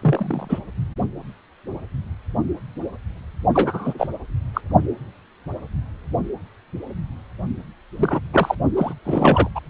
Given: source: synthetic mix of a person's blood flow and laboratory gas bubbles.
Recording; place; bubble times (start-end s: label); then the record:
Doppler ultrasound of blood flow; precordium
0.00-0.59 s: bubbles
3.53-3.94 s: bubbles
3.98-4.07 s: bubbles
4.54-4.61 s: bubbles
7.96-8.20 s: bubbles
8.34-8.55 s: bubbles
8.76-8.94 s: bubbles
9.05-9.49 s: bubbles
9.55-9.60 s: bubbles
From the record:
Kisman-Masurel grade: 223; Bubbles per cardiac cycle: several, 3 to 8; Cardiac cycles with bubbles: 10 to 50%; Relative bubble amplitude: loud (0.450 to 0.775); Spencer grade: 2 (many but less than half of the cardiac periods contain bubble signals, singularly or in groups); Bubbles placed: only in the low amplitude regions of the cardiac cycle